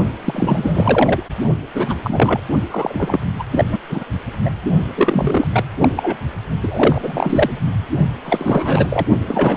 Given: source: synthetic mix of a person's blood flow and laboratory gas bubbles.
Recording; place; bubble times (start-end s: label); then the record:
Doppler ultrasound of blood flow; precordium
0.24-1.23 s: bubbles
1.73-1.95 s: bubbles
2.02-2.41 s: bubbles
2.71-3.20 s: bubbles
3.39-3.43 s: bubbles
3.51-3.65 s: bubbles
3.72-3.78 s: bubbles
3.89-4.04 s: bubbles
4.45-4.50 s: bubbles
4.96-5.48 s: bubbles
5.52-5.64 s: bubbles
5.80-5.90 s: bubbles
5.96-6.17 s: bubbles
6.63-7.69 s: bubbles
8.22-8.88 s: bubbles
8.90-9.06 s: bubbles
9.26-9.57 s: bubbles
From the record:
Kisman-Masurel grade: 333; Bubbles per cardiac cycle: rolling drumbeat, 9 or more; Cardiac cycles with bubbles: 50 to 99%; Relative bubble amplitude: loud (0.450 to 0.775); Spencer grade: 3 (all of the cardiac periods contain showers or single bubble signals, but not dominating or overriding the cardiac motion signals); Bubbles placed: only in the low amplitude regions of the cardiac cycle